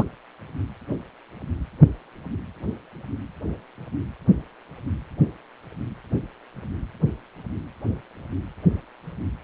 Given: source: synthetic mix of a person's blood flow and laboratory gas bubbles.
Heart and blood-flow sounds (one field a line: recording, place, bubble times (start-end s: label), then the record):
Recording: Doppler ultrasound of blood flow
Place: precordium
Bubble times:
0.00-0.04 s: bubbles
From the record:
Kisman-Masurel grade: 213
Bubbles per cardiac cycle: several, 3 to 8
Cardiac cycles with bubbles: 1 to 10%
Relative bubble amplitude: loud (0.450 to 0.775)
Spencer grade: 1 (occasional bubble signal discernible with the cardiac motion signal, with majority of cardiac periods free of bubbles)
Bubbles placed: anywhere in the cardiac cycle